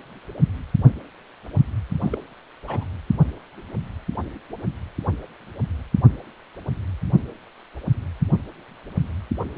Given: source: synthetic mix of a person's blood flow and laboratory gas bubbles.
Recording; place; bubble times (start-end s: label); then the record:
Doppler ultrasound of blood flow; precordium
2.00-2.18 s: bubbles
2.65-2.85 s: bubbles
From the record:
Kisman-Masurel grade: 221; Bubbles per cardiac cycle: several, 3 to 8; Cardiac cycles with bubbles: 10 to 50%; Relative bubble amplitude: barely perceptible (0.100 to 0.250); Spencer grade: 2 (many but less than half of the cardiac periods contain bubble signals, singularly or in groups); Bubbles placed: only in the low amplitude regions of the cardiac cycle